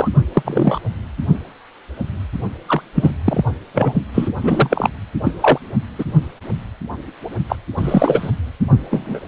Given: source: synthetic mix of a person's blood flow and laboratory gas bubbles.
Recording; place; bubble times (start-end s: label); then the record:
Doppler ultrasound of blood flow; precordium
0.00-0.09 s: bubbles
0.33-0.80 s: bubbles
2.68-2.81 s: bubbles
2.95-3.11 s: bubbles
3.25-3.44 s: bubbles
3.74-3.93 s: bubbles
4.13-4.29 s: bubbles
4.42-4.88 s: bubbles
5.24-5.32 s: bubbles
5.41-5.58 s: bubbles
5.99-6.04 s: bubbles
7.49-7.55 s: bubbles
7.77-8.30 s: bubbles
8.91-9.20 s: bubbles
From the record:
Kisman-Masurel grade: 233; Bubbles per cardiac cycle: several, 3 to 8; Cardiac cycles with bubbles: 50 to 99%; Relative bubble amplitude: loud (0.450 to 0.775); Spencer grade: 3 (all of the cardiac periods contain showers or single bubble signals, but not dominating or overriding the cardiac motion signals); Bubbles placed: only in the low amplitude regions of the cardiac cycle